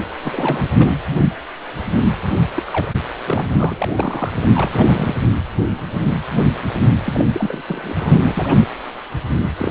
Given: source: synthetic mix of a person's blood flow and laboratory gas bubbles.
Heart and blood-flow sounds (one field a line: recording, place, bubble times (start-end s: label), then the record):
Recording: Doppler ultrasound of blood flow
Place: precordium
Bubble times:
0.23-0.73 s: bubbles
0.78-0.88 s: bubbles
2.56-2.62 s: bubbles
2.67-2.90 s: bubbles
2.94-3.01 s: bubbles
3.25-4.29 s: bubbles
4.33-5.15 s: bubbles
7.04-7.25 s: bubbles
7.33-7.63 s: bubbles
7.68-8.20 s: bubbles
8.23-8.65 s: bubbles
9.57-9.71 s: bubbles
From the record:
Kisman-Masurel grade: 232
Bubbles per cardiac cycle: several, 3 to 8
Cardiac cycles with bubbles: 50 to 99%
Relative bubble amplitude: moderate (0.250 to 0.450)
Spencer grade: 3 (all of the cardiac periods contain showers or single bubble signals, but not dominating or overriding the cardiac motion signals)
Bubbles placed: anywhere in the cardiac cycle